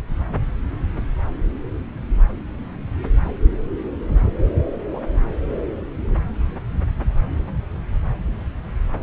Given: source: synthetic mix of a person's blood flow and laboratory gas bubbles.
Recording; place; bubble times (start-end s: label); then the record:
Doppler ultrasound of blood flow; subclavian vein
4.93-5.00 s: bubbles
From the record:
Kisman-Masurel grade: 111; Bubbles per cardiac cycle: 1 to 2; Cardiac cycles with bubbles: 1 to 10%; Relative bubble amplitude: barely perceptible (0.100 to 0.250); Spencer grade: 1 (occasional bubble signal discernible with the cardiac motion signal, with majority of cardiac periods free of bubbles); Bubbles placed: anywhere in the cardiac cycle